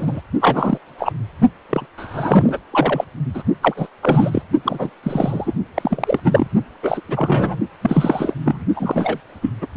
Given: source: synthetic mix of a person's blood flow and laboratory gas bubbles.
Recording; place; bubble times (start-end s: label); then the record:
Doppler ultrasound of blood flow; precordium
0.00-0.21 s: bubbles
0.40-0.78 s: bubbles
0.98-1.12 s: bubbles
1.69-1.86 s: bubbles
1.97-2.59 s: bubbles
2.71-3.04 s: bubbles
3.34-3.43 s: bubbles
3.61-3.74 s: bubbles
3.76-3.87 s: bubbles
4.02-4.42 s: bubbles
4.64-4.90 s: bubbles
5.03-5.54 s: bubbles
5.75-6.20 s: bubbles
6.23-6.48 s: bubbles
6.83-7.01 s: bubbles
7.08-7.59 s: bubbles
7.81-8.34 s: bubbles
8.45-8.64 s: bubbles
8.76-9.21 s: bubbles
9.42-9.50 s: bubbles
9.62-9.67 s: bubbles
From the record:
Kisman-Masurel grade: 343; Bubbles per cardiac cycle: rolling drumbeat, 9 or more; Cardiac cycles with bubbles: 100%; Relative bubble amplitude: loud (0.450 to 0.775); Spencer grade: 3 (all of the cardiac periods contain showers or single bubble signals, but not dominating or overriding the cardiac motion signals); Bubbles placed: only in the low amplitude regions of the cardiac cycle